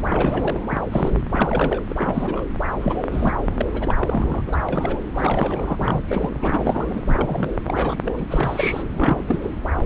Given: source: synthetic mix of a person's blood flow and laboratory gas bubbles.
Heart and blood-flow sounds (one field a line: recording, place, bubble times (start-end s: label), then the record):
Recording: Doppler ultrasound of blood flow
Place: subclavian vein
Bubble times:
0.05-0.60 s: bubbles
0.68-0.78 s: bubbles
0.90-1.15 s: bubbles
1.31-1.83 s: bubbles
1.89-2.45 s: bubbles
2.73-3.33 s: bubbles
3.57-3.66 s: bubbles
3.73-4.42 s: bubbles
4.46-4.58 s: bubbles
4.68-5.06 s: bubbles
5.14-6.01 s: bubbles
6.08-6.29 s: bubbles
6.39-7.02 s: bubbles
7.05-7.55 s: bubbles
7.66-8.26 s: bubbles
8.30-8.83 s: bubbles
8.94-9.40 s: bubbles
9.43-9.49 s: bubbles
9.78-9.83 s: bubbles
From the record:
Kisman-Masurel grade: 342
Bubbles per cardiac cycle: rolling drumbeat, 9 or more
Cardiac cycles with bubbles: 100%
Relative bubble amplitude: moderate (0.250 to 0.450)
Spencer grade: 3 (all of the cardiac periods contain showers or single bubble signals, but not dominating or overriding the cardiac motion signals)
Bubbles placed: anywhere in the cardiac cycle